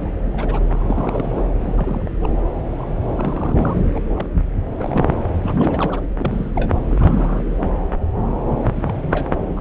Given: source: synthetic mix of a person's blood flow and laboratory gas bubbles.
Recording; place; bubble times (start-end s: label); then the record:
Doppler ultrasound of blood flow; subclavian vein
0.00-0.10 s: bubbles
0.33-0.59 s: bubbles
0.68-1.44 s: bubbles
1.59-2.09 s: bubbles
2.23-2.28 s: bubbles
2.77-2.96 s: bubbles
3.15-3.80 s: bubbles
3.94-4.00 s: bubbles
4.16-4.26 s: bubbles
4.79-5.11 s: bubbles
5.42-6.00 s: bubbles
6.17-6.70 s: bubbles
6.89-7.49 s: bubbles
8.66-8.73 s: bubbles
8.76-8.95 s: bubbles
9.11-9.29 s: bubbles
9.57-9.61 s: bubbles
From the record:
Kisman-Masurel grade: 232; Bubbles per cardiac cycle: several, 3 to 8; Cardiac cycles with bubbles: 50 to 99%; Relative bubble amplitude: moderate (0.250 to 0.450); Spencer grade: 3 (all of the cardiac periods contain showers or single bubble signals, but not dominating or overriding the cardiac motion signals); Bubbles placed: anywhere in the cardiac cycle